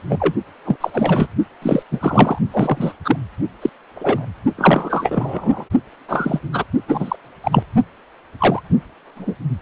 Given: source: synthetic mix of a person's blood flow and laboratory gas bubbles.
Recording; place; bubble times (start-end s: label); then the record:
Doppler ultrasound of blood flow; precordium
0.09-0.34 s: bubbles
0.65-0.76 s: bubbles
0.80-1.27 s: bubbles
1.62-1.82 s: bubbles
1.91-2.38 s: bubbles
2.50-2.92 s: bubbles
3.04-3.17 s: bubbles
3.62-3.70 s: bubbles
3.95-4.25 s: bubbles
4.57-5.65 s: bubbles
6.08-6.40 s: bubbles
6.53-6.64 s: bubbles
6.88-7.16 s: bubbles
7.44-7.63 s: bubbles
8.38-8.61 s: bubbles
9.16-9.36 s: bubbles
From the record:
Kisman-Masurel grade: 243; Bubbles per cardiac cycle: several, 3 to 8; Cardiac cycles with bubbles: 100%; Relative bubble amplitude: loud (0.450 to 0.775); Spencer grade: 3 (all of the cardiac periods contain showers or single bubble signals, but not dominating or overriding the cardiac motion signals); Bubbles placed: only in the low amplitude regions of the cardiac cycle